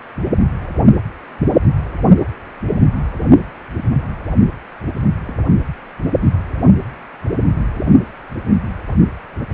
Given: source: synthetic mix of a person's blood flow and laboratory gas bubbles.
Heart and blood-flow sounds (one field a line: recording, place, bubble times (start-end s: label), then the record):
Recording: Doppler ultrasound of blood flow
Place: precordium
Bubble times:
5.11-5.18 s: bubbles
5.26-5.39 s: bubbles
From the record:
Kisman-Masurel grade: 211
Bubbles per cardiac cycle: several, 3 to 8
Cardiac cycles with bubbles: 1 to 10%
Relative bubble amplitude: barely perceptible (0.100 to 0.250)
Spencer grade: 1 (occasional bubble signal discernible with the cardiac motion signal, with majority of cardiac periods free of bubbles)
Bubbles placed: anywhere in the cardiac cycle